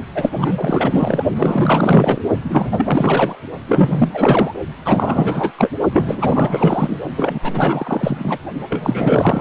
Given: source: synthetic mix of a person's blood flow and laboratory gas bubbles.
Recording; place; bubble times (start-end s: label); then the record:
Doppler ultrasound of blood flow; precordium
0.15-1.25 s: bubbles
1.36-2.21 s: bubbles
2.44-3.36 s: bubbles
3.68-4.54 s: bubbles
4.85-5.51 s: bubbles
5.58-5.70 s: bubbles
5.92-6.98 s: bubbles
7.16-7.39 s: bubbles
7.42-8.38 s: bubbles
8.70-9.41 s: bubbles
From the record:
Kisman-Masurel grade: 444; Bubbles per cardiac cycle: continuous sound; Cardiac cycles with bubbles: 100%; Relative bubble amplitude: maximal (0.775 to 0.999); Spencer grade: 4 (maximum detectable bubble signal sounding continuously throughout systole and diastole of every cardiac period, and overriding the amplitude of the normal cardiac signals); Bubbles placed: only in the low amplitude regions of the cardiac cycle